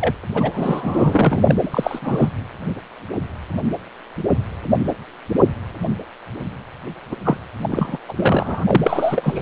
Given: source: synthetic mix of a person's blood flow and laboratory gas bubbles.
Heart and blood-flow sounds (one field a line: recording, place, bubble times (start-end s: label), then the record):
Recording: Doppler ultrasound of blood flow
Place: precordium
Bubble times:
0.00-0.14 s: bubbles
0.35-1.55 s: bubbles
1.62-1.70 s: bubbles
1.73-1.99 s: bubbles
2.02-2.31 s: bubbles
7.11-7.15 s: bubbles
7.24-7.37 s: bubbles
7.60-7.98 s: bubbles
8.09-9.41 s: bubbles
From the record:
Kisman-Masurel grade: 333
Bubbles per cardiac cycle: rolling drumbeat, 9 or more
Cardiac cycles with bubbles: 50 to 99%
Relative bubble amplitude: loud (0.450 to 0.775)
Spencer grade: 3 (all of the cardiac periods contain showers or single bubble signals, but not dominating or overriding the cardiac motion signals)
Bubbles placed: anywhere in the cardiac cycle